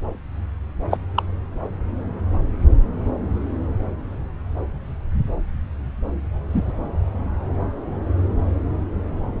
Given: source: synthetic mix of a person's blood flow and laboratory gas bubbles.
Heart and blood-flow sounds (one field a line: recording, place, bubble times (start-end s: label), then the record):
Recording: Doppler ultrasound of blood flow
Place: subclavian vein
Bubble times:
0.91-0.97 s: bubbles
1.15-1.23 s: bubbles
6.50-6.73 s: bubbles
From the record:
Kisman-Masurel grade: 122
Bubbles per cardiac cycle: 1 to 2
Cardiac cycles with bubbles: 10 to 50%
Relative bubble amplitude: moderate (0.250 to 0.450)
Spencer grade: 2 (many but less than half of the cardiac periods contain bubble signals, singularly or in groups)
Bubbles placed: anywhere in the cardiac cycle